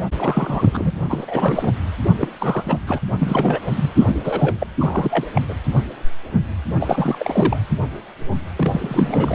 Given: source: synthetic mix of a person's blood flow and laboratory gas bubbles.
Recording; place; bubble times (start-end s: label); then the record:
Doppler ultrasound of blood flow; precordium
0.14-0.91 s: bubbles
1.09-1.73 s: bubbles
2.17-2.29 s: bubbles
2.39-2.79 s: bubbles
2.86-2.99 s: bubbles
3.18-3.60 s: bubbles
3.70-3.90 s: bubbles
3.95-4.54 s: bubbles
4.60-4.67 s: bubbles
4.79-5.26 s: bubbles
5.35-5.42 s: bubbles
5.49-5.54 s: bubbles
6.79-7.59 s: bubbles
8.56-9.35 s: bubbles
From the record:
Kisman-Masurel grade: 332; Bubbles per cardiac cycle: rolling drumbeat, 9 or more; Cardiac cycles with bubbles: 50 to 99%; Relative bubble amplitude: moderate (0.250 to 0.450); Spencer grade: 3 (all of the cardiac periods contain showers or single bubble signals, but not dominating or overriding the cardiac motion signals); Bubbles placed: anywhere in the cardiac cycle